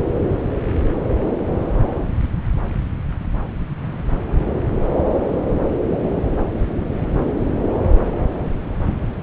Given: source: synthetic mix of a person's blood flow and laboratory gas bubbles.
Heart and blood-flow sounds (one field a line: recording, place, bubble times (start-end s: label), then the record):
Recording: Doppler ultrasound of blood flow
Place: subclavian vein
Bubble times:
no bubbles
From the record:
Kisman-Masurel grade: 000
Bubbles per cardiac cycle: 0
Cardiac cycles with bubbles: 0%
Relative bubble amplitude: no bubbles discernible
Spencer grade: 0 (complete lack of bubble signals)